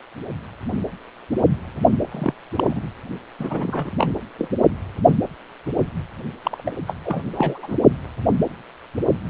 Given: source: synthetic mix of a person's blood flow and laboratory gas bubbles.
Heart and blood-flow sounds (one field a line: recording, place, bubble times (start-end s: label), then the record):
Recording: Doppler ultrasound of blood flow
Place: precordium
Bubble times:
2.11-2.33 s: bubbles
2.54-2.80 s: bubbles
3.39-3.91 s: bubbles
3.98-4.12 s: bubbles
4.38-4.48 s: bubbles
6.42-6.73 s: bubbles
6.87-6.94 s: bubbles
7.05-7.23 s: bubbles
7.34-7.77 s: bubbles
From the record:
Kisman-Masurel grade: 222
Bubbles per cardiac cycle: several, 3 to 8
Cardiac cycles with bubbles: 10 to 50%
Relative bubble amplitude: moderate (0.250 to 0.450)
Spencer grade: 2 (many but less than half of the cardiac periods contain bubble signals, singularly or in groups)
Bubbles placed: only in the low amplitude regions of the cardiac cycle